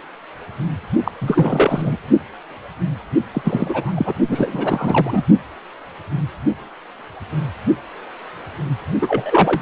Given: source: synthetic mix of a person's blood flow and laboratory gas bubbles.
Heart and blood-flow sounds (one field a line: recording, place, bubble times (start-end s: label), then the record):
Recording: Doppler ultrasound of blood flow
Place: precordium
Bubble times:
1.04-1.11 s: bubbles
1.21-1.96 s: bubbles
3.33-4.15 s: bubbles
4.28-5.23 s: bubbles
9.01-9.62 s: bubbles
From the record:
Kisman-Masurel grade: 333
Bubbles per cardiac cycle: rolling drumbeat, 9 or more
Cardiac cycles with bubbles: 50 to 99%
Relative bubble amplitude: loud (0.450 to 0.775)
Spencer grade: 3 (all of the cardiac periods contain showers or single bubble signals, but not dominating or overriding the cardiac motion signals)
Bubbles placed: only in the low amplitude regions of the cardiac cycle